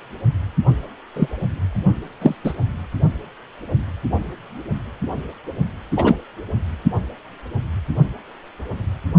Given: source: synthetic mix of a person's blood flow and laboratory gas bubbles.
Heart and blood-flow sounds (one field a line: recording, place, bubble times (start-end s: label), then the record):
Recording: Doppler ultrasound of blood flow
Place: precordium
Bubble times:
1.16-1.28 s: bubbles
2.21-2.35 s: bubbles
2.44-2.53 s: bubbles
5.96-6.17 s: bubbles
From the record:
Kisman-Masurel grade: 123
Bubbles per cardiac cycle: 1 to 2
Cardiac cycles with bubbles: 10 to 50%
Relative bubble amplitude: loud (0.450 to 0.775)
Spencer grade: 2 (many but less than half of the cardiac periods contain bubble signals, singularly or in groups)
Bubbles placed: only in the low amplitude regions of the cardiac cycle